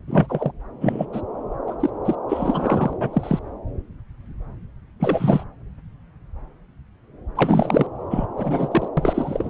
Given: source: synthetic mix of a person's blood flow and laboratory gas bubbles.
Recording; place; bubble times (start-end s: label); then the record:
Doppler ultrasound of blood flow; subclavian vein
0.08-0.52 s: bubbles
0.80-1.05 s: bubbles
1.12-1.21 s: bubbles
1.67-1.74 s: bubbles
1.80-1.90 s: bubbles
2.05-2.15 s: bubbles
2.29-2.93 s: bubbles
3.00-3.09 s: bubbles
3.12-3.40 s: bubbles
5.00-5.44 s: bubbles
7.35-7.87 s: bubbles
8.10-8.26 s: bubbles
8.37-8.68 s: bubbles
8.71-8.88 s: bubbles
8.97-9.50 s: bubbles
From the record:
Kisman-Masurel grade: 233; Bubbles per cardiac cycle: several, 3 to 8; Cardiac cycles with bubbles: 50 to 99%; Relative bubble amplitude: loud (0.450 to 0.775); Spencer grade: 3 (all of the cardiac periods contain showers or single bubble signals, but not dominating or overriding the cardiac motion signals); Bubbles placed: anywhere in the cardiac cycle